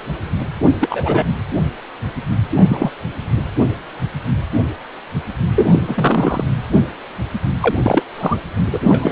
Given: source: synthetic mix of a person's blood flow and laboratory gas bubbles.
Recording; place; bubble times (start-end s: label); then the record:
Doppler ultrasound of blood flow; precordium
0.80-1.24 s: bubbles
2.54-2.90 s: bubbles
5.56-5.81 s: bubbles
5.88-6.43 s: bubbles
7.60-8.04 s: bubbles
8.18-8.40 s: bubbles
8.72-8.79 s: bubbles
8.89-9.12 s: bubbles
From the record:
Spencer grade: 3 (all of the cardiac periods contain showers or single bubble signals, but not dominating or overriding the cardiac motion signals); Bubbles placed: anywhere in the cardiac cycle